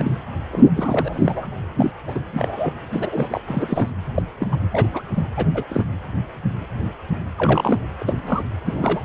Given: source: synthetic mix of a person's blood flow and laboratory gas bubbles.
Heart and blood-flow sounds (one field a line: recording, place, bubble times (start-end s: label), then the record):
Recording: Doppler ultrasound of blood flow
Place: precordium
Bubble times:
0.00-0.11 s: bubbles
0.52-0.70 s: bubbles
0.76-1.49 s: bubbles
1.78-1.91 s: bubbles
2.08-2.20 s: bubbles
2.36-2.73 s: bubbles
2.92-3.41 s: bubbles
3.47-3.92 s: bubbles
4.16-4.23 s: bubbles
4.40-4.48 s: bubbles
4.52-4.56 s: bubbles
4.71-4.89 s: bubbles
4.92-5.03 s: bubbles
5.16-5.23 s: bubbles
5.37-5.46 s: bubbles
5.54-5.64 s: bubbles
5.69-5.84 s: bubbles
7.38-7.80 s: bubbles
8.00-8.44 s: bubbles
8.66-9.05 s: bubbles
From the record:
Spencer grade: 3 (all of the cardiac periods contain showers or single bubble signals, but not dominating or overriding the cardiac motion signals)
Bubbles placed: anywhere in the cardiac cycle